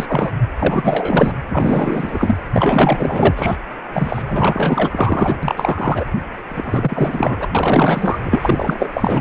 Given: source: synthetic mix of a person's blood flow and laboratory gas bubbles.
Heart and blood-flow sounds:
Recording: Doppler ultrasound of blood flow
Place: precordium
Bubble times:
0.00-0.32 s: bubbles
0.59-1.33 s: bubbles
1.50-2.37 s: bubbles
2.53-3.56 s: bubbles
3.93-4.22 s: bubbles
4.27-5.37 s: bubbles
5.43-6.04 s: bubbles
6.49-7.48 s: bubbles
7.54-8.19 s: bubbles
8.23-8.88 s: bubbles
8.93-9.21 s: bubbles
From the record:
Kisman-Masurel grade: 444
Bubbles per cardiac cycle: continuous sound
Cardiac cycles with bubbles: 100%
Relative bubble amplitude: maximal (0.775 to 0.999)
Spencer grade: 4 (maximum detectable bubble signal sounding continuously throughout systole and diastole of every cardiac period, and overriding the amplitude of the normal cardiac signals)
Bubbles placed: anywhere in the cardiac cycle

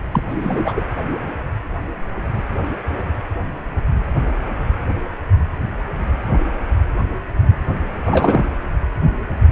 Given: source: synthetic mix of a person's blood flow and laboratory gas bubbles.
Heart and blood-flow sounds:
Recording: Doppler ultrasound of blood flow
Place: precordium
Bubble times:
0.12-0.23 s: bubbles
0.29-0.72 s: bubbles
0.76-0.82 s: bubbles
8.05-8.46 s: bubbles
From the record:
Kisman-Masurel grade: 212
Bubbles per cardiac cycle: several, 3 to 8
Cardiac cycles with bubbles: 1 to 10%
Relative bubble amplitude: moderate (0.250 to 0.450)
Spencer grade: 1 (occasional bubble signal discernible with the cardiac motion signal, with majority of cardiac periods free of bubbles)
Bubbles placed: anywhere in the cardiac cycle

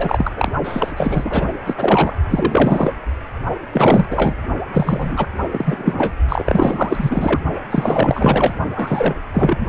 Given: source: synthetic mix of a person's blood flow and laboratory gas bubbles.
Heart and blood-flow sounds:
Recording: Doppler ultrasound of blood flow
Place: precordium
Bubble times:
0.00-0.33 s: bubbles
0.36-0.52 s: bubbles
0.64-0.92 s: bubbles
0.96-1.46 s: bubbles
1.65-2.13 s: bubbles
2.29-2.93 s: bubbles
3.73-4.34 s: bubbles
4.73-5.27 s: bubbles
5.50-6.13 s: bubbles
6.29-7.41 s: bubbles
7.70-8.53 s: bubbles
8.75-9.15 s: bubbles
9.33-9.67 s: bubbles
From the record:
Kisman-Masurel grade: 444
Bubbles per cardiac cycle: continuous sound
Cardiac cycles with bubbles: 100%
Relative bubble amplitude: maximal (0.775 to 0.999)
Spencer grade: 4 (maximum detectable bubble signal sounding continuously throughout systole and diastole of every cardiac period, and overriding the amplitude of the normal cardiac signals)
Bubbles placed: only in the low amplitude regions of the cardiac cycle

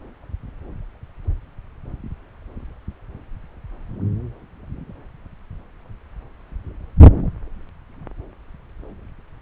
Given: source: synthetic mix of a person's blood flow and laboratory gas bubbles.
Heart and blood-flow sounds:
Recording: Doppler ultrasound of blood flow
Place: subclavian vein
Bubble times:
no bubbles
From the record:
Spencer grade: 0 (complete lack of bubble signals)

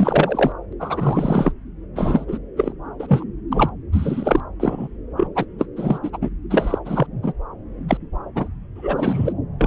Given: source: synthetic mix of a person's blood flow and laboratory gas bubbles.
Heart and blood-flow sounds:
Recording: Doppler ultrasound of blood flow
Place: subclavian vein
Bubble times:
0.00-0.52 s: bubbles
0.79-1.52 s: bubbles
1.96-2.38 s: bubbles
2.56-2.73 s: bubbles
2.99-3.24 s: bubbles
3.52-3.71 s: bubbles
3.92-4.40 s: bubbles
4.59-4.88 s: bubbles
5.16-5.27 s: bubbles
5.35-5.45 s: bubbles
5.58-5.67 s: bubbles
5.76-5.98 s: bubbles
6.02-6.10 s: bubbles
6.12-6.18 s: bubbles
6.21-6.29 s: bubbles
6.50-6.81 s: bubbles
6.85-7.06 s: bubbles
7.22-7.33 s: bubbles
7.88-7.97 s: bubbles
8.35-8.48 s: bubbles
8.76-9.33 s: bubbles
9.58-9.67 s: bubbles
From the record:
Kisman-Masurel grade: 343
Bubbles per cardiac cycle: rolling drumbeat, 9 or more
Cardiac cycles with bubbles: 100%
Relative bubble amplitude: loud (0.450 to 0.775)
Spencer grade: 3 (all of the cardiac periods contain showers or single bubble signals, but not dominating or overriding the cardiac motion signals)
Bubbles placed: anywhere in the cardiac cycle

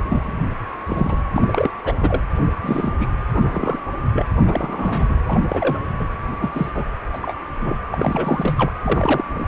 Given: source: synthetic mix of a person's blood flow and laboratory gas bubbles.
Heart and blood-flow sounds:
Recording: Doppler ultrasound of blood flow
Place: precordium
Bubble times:
0.04-0.36 s: bubbles
0.86-1.24 s: bubbles
1.32-1.71 s: bubbles
1.84-1.97 s: bubbles
2.00-2.23 s: bubbles
2.61-3.07 s: bubbles
3.33-3.81 s: bubbles
4.13-4.25 s: bubbles
4.44-5.04 s: bubbles
5.09-5.21 s: bubbles
5.28-5.79 s: bubbles
5.99-6.08 s: bubbles
6.31-6.50 s: bubbles
6.53-6.70 s: bubbles
6.75-6.84 s: bubbles
7.12-7.19 s: bubbles
7.22-7.34 s: bubbles
7.59-7.77 s: bubbles
7.92-8.71 s: bubbles
8.83-9.24 s: bubbles
9.34-9.48 s: bubbles
From the record:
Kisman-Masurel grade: 242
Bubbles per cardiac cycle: several, 3 to 8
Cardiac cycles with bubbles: 100%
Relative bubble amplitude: moderate (0.250 to 0.450)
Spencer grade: 3 (all of the cardiac periods contain showers or single bubble signals, but not dominating or overriding the cardiac motion signals)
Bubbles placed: anywhere in the cardiac cycle

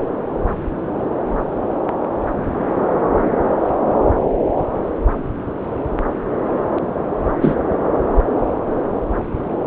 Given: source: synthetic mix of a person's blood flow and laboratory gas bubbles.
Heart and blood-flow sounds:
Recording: Doppler ultrasound of blood flow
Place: subclavian vein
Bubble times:
7.42-7.55 s: bubbles
From the record:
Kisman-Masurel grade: 113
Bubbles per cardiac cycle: 1 to 2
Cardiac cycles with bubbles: 1 to 10%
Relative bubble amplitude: loud (0.450 to 0.775)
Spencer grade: 1 (occasional bubble signal discernible with the cardiac motion signal, with majority of cardiac periods free of bubbles)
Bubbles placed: anywhere in the cardiac cycle

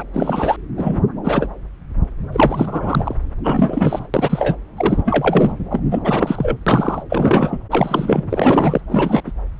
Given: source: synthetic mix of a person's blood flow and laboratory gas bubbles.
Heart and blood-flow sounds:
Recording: Doppler ultrasound of blood flow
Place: subclavian vein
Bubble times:
0.00-0.03 s: bubbles
0.14-0.57 s: bubbles
0.77-1.02 s: bubbles
1.23-1.48 s: bubbles
2.32-3.15 s: bubbles
3.43-4.07 s: bubbles
4.14-4.58 s: bubbles
4.76-5.52 s: bubbles
5.70-5.81 s: bubbles
5.91-6.00 s: bubbles
6.04-6.57 s: bubbles
6.67-7.03 s: bubbles
7.09-7.59 s: bubbles
7.70-8.24 s: bubbles
8.29-8.81 s: bubbles
8.88-9.21 s: bubbles
9.26-9.32 s: bubbles
From the record:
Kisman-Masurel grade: 333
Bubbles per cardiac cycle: rolling drumbeat, 9 or more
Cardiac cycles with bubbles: 50 to 99%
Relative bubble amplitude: loud (0.450 to 0.775)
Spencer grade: 3 (all of the cardiac periods contain showers or single bubble signals, but not dominating or overriding the cardiac motion signals)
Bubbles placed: anywhere in the cardiac cycle

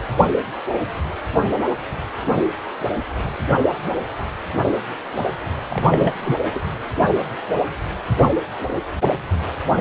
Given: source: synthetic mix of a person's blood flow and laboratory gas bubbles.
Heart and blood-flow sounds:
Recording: Doppler ultrasound of blood flow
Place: precordium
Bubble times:
5.69-6.21 s: bubbles
6.23-6.38 s: bubbles
6.54-6.59 s: bubbles
From the record:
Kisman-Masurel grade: 212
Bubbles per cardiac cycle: several, 3 to 8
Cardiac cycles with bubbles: 1 to 10%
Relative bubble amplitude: moderate (0.250 to 0.450)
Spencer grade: 1 (occasional bubble signal discernible with the cardiac motion signal, with majority of cardiac periods free of bubbles)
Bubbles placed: anywhere in the cardiac cycle

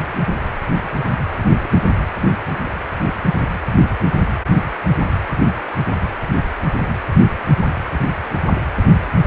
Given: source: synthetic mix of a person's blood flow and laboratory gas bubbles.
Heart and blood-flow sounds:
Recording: Doppler ultrasound of blood flow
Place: precordium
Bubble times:
1.62-1.69 s: bubbles
2.53-2.61 s: bubbles
From the record:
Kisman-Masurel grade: 111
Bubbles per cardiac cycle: 1 to 2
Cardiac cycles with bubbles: 1 to 10%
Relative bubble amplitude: barely perceptible (0.100 to 0.250)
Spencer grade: 1 (occasional bubble signal discernible with the cardiac motion signal, with majority of cardiac periods free of bubbles)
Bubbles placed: anywhere in the cardiac cycle

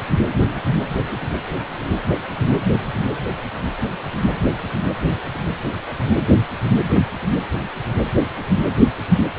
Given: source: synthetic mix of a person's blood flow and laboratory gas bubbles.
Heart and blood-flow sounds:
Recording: Doppler ultrasound of blood flow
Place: precordium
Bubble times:
no bubbles
From the record:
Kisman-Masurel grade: 000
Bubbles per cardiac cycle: 0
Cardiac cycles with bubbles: 0%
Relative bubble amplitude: no bubbles discernible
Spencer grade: 0 (complete lack of bubble signals)

